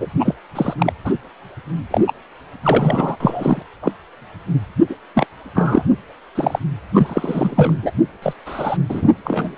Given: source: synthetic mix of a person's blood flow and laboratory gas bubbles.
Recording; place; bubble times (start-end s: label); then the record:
Doppler ultrasound of blood flow; precordium
0.00-0.07 s: bubbles
0.18-0.35 s: bubbles
0.55-0.73 s: bubbles
0.78-0.93 s: bubbles
1.04-1.13 s: bubbles
1.91-2.05 s: bubbles
2.07-2.12 s: bubbles
2.62-3.16 s: bubbles
3.20-3.62 s: bubbles
3.82-3.92 s: bubbles
4.89-4.94 s: bubbles
5.14-5.26 s: bubbles
5.54-5.81 s: bubbles
6.35-6.59 s: bubbles
6.93-7.74 s: bubbles
7.82-7.91 s: bubbles
8.22-8.33 s: bubbles
8.46-8.77 s: bubbles
8.89-9.11 s: bubbles
9.24-9.55 s: bubbles
From the record:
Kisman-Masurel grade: 233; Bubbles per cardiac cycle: several, 3 to 8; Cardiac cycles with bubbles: 50 to 99%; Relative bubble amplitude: loud (0.450 to 0.775); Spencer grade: 3 (all of the cardiac periods contain showers or single bubble signals, but not dominating or overriding the cardiac motion signals); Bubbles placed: anywhere in the cardiac cycle